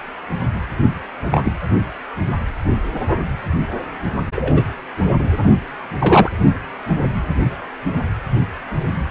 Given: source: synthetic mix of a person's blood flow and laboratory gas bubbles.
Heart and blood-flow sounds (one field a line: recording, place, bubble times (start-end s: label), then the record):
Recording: Doppler ultrasound of blood flow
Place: precordium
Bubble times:
1.31-1.53 s: bubbles
4.35-4.65 s: bubbles
5.19-5.24 s: bubbles
6.00-6.32 s: bubbles
From the record:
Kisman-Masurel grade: 123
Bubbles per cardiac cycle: 1 to 2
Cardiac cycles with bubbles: 10 to 50%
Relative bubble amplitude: loud (0.450 to 0.775)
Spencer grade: 2 (many but less than half of the cardiac periods contain bubble signals, singularly or in groups)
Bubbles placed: anywhere in the cardiac cycle